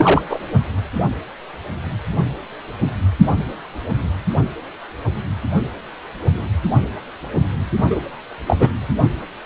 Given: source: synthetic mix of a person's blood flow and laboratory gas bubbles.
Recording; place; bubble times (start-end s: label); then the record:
Doppler ultrasound of blood flow; precordium
0.00-0.22 s: bubbles
0.29-0.40 s: bubbles
7.90-8.01 s: bubbles
8.46-8.56 s: bubbles
8.59-8.69 s: bubbles
From the record:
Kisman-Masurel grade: 223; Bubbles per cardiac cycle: several, 3 to 8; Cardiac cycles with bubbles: 10 to 50%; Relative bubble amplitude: loud (0.450 to 0.775); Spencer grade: 2 (many but less than half of the cardiac periods contain bubble signals, singularly or in groups); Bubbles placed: only in the low amplitude regions of the cardiac cycle